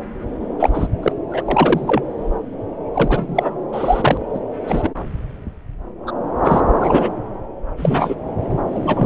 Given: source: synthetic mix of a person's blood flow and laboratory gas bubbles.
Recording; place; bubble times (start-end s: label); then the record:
Doppler ultrasound of blood flow; subclavian vein
0.59-0.70 s: bubbles
0.74-0.88 s: bubbles
1.02-1.12 s: bubbles
1.29-1.43 s: bubbles
1.45-2.02 s: bubbles
2.94-3.59 s: bubbles
3.72-4.18 s: bubbles
4.34-4.39 s: bubbles
4.67-4.90 s: bubbles
6.06-6.12 s: bubbles
6.45-6.61 s: bubbles
6.80-7.10 s: bubbles
7.77-8.15 s: bubbles
8.70-9.06 s: bubbles
From the record:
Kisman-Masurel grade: 233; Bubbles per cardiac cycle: several, 3 to 8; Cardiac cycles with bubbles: 50 to 99%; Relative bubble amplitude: loud (0.450 to 0.775); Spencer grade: 3 (all of the cardiac periods contain showers or single bubble signals, but not dominating or overriding the cardiac motion signals); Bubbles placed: anywhere in the cardiac cycle